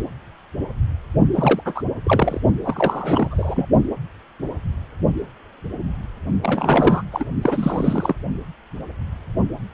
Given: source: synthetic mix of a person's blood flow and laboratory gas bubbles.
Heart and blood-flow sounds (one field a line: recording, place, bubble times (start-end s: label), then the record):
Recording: Doppler ultrasound of blood flow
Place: precordium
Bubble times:
1.33-1.62 s: bubbles
1.65-1.82 s: bubbles
2.04-2.40 s: bubbles
2.65-3.27 s: bubbles
3.31-3.69 s: bubbles
6.42-7.03 s: bubbles
7.12-7.25 s: bubbles
7.42-8.15 s: bubbles
From the record:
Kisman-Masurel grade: 332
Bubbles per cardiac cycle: rolling drumbeat, 9 or more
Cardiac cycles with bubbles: 50 to 99%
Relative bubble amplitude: moderate (0.250 to 0.450)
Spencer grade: 3 (all of the cardiac periods contain showers or single bubble signals, but not dominating or overriding the cardiac motion signals)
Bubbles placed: only in the low amplitude regions of the cardiac cycle